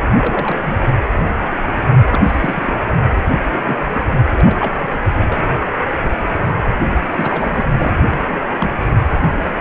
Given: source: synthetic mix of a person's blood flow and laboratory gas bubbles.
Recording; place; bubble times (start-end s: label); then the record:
Doppler ultrasound of blood flow; precordium
0.18-0.78 s: bubbles
2.11-2.63 s: bubbles
2.66-2.73 s: bubbles
2.89-2.94 s: bubbles
3.16-3.21 s: bubbles
3.52-3.58 s: bubbles
3.64-3.83 s: bubbles
3.92-4.02 s: bubbles
4.35-4.74 s: bubbles
4.77-4.87 s: bubbles
4.91-4.99 s: bubbles
5.22-5.44 s: bubbles
6.96-7.01 s: bubbles
7.15-7.65 s: bubbles
7.76-7.95 s: bubbles
8.09-8.19 s: bubbles
8.28-8.43 s: bubbles
8.59-8.71 s: bubbles
9.21-9.29 s: bubbles
9.43-9.52 s: bubbles
From the record:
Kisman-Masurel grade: 232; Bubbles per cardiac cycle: several, 3 to 8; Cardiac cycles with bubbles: 50 to 99%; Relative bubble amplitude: moderate (0.250 to 0.450); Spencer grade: 3 (all of the cardiac periods contain showers or single bubble signals, but not dominating or overriding the cardiac motion signals); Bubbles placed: anywhere in the cardiac cycle